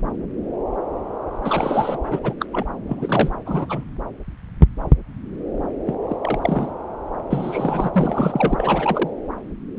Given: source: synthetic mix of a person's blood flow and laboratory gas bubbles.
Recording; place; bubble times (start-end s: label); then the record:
Doppler ultrasound of blood flow; subclavian vein
1.43-1.99 s: bubbles
2.11-2.20 s: bubbles
2.23-2.35 s: bubbles
2.40-2.46 s: bubbles
2.53-2.67 s: bubbles
2.87-3.31 s: bubbles
3.46-3.84 s: bubbles
5.86-5.94 s: bubbles
6.08-6.16 s: bubbles
6.21-6.39 s: bubbles
6.42-6.71 s: bubbles
7.30-7.91 s: bubbles
7.94-9.10 s: bubbles
From the record:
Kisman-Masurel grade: 232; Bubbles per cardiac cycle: several, 3 to 8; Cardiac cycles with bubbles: 50 to 99%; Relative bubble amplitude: moderate (0.250 to 0.450); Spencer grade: 3 (all of the cardiac periods contain showers or single bubble signals, but not dominating or overriding the cardiac motion signals); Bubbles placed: anywhere in the cardiac cycle